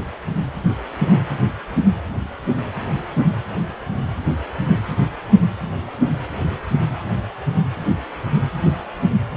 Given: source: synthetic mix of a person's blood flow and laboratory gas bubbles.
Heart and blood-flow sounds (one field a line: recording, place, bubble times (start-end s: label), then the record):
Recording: Doppler ultrasound of blood flow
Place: precordium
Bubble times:
no bubbles
From the record:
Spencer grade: 0 (complete lack of bubble signals)